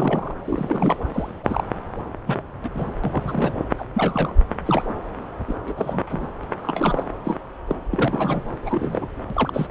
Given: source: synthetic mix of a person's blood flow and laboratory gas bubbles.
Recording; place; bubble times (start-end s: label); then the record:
Doppler ultrasound of blood flow; subclavian vein
0.00-0.33 s: bubbles
0.45-0.97 s: bubbles
1.13-1.31 s: bubbles
1.43-1.64 s: bubbles
2.26-2.42 s: bubbles
2.63-2.70 s: bubbles
2.74-2.91 s: bubbles
3.04-3.54 s: bubbles
3.78-3.85 s: bubbles
3.93-4.35 s: bubbles
4.66-4.83 s: bubbles
4.88-4.94 s: bubbles
5.47-5.54 s: bubbles
5.67-5.73 s: bubbles
5.76-6.00 s: bubbles
6.09-6.27 s: bubbles
6.43-6.46 s: bubbles
6.62-7.04 s: bubbles
7.24-7.39 s: bubbles
7.67-7.76 s: bubbles
7.92-8.43 s: bubbles
8.66-9.07 s: bubbles
9.30-9.67 s: bubbles
From the record:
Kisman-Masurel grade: 242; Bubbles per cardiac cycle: several, 3 to 8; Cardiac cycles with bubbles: 100%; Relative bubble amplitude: moderate (0.250 to 0.450); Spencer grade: 3 (all of the cardiac periods contain showers or single bubble signals, but not dominating or overriding the cardiac motion signals); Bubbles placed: anywhere in the cardiac cycle